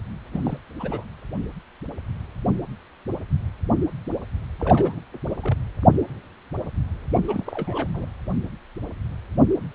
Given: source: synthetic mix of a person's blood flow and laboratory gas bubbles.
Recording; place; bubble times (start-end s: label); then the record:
Doppler ultrasound of blood flow; precordium
0.32-0.60 s: bubbles
0.79-1.03 s: bubbles
4.59-5.00 s: bubbles
5.30-5.38 s: bubbles
5.42-5.57 s: bubbles
7.13-7.88 s: bubbles
7.94-8.06 s: bubbles
From the record:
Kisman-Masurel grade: 221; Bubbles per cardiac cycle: several, 3 to 8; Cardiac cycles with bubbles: 10 to 50%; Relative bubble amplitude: barely perceptible (0.100 to 0.250); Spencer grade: 2 (many but less than half of the cardiac periods contain bubble signals, singularly or in groups); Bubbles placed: anywhere in the cardiac cycle